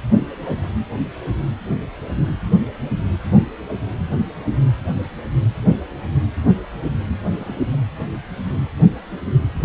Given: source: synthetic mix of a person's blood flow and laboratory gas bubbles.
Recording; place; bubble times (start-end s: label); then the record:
Doppler ultrasound of blood flow; precordium
7.38-7.69 s: bubbles
7.73-7.76 s: bubbles
From the record:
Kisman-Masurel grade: 111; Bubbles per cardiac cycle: 1 to 2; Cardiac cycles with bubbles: 1 to 10%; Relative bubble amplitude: barely perceptible (0.100 to 0.250); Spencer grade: 1 (occasional bubble signal discernible with the cardiac motion signal, with majority of cardiac periods free of bubbles); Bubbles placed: anywhere in the cardiac cycle